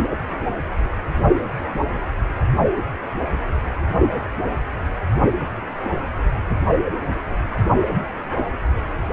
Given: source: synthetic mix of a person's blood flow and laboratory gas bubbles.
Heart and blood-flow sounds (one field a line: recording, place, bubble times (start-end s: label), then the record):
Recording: Doppler ultrasound of blood flow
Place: precordium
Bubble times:
no bubbles
From the record:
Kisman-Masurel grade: 000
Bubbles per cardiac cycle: 0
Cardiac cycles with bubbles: 0%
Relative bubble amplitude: no bubbles discernible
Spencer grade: 0 (complete lack of bubble signals)